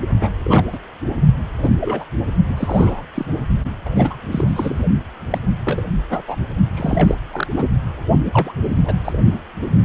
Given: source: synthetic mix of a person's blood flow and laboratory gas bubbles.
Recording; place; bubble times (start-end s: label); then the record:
Doppler ultrasound of blood flow; precordium
0.20-0.28 s: bubbles
0.44-0.65 s: bubbles
0.72-0.78 s: bubbles
1.61-1.70 s: bubbles
1.80-2.04 s: bubbles
2.48-2.54 s: bubbles
2.57-3.03 s: bubbles
3.15-3.25 s: bubbles
3.85-3.91 s: bubbles
3.96-4.16 s: bubbles
4.32-4.84 s: bubbles
5.30-5.40 s: bubbles
5.64-5.83 s: bubbles
6.09-6.22 s: bubbles
6.27-6.36 s: bubbles
6.74-7.16 s: bubbles
7.33-7.47 s: bubbles
7.56-7.68 s: bubbles
8.33-8.54 s: bubbles
8.72-8.99 s: bubbles
9.05-9.12 s: bubbles
9.62-9.67 s: bubbles
9.83-9.85 s: bubbles
From the record:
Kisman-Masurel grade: 242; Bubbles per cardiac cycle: several, 3 to 8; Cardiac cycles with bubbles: 100%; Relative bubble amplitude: moderate (0.250 to 0.450); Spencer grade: 3 (all of the cardiac periods contain showers or single bubble signals, but not dominating or overriding the cardiac motion signals); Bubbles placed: only in the low amplitude regions of the cardiac cycle